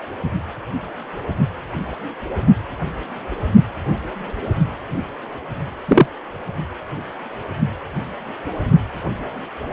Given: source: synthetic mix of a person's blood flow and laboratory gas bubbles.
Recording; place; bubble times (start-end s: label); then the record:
Doppler ultrasound of blood flow; precordium
5.88-6.07 s: bubbles
From the record:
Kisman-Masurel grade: 113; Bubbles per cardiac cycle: 1 to 2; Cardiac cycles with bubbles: 1 to 10%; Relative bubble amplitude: loud (0.450 to 0.775); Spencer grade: 1 (occasional bubble signal discernible with the cardiac motion signal, with majority of cardiac periods free of bubbles); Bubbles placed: anywhere in the cardiac cycle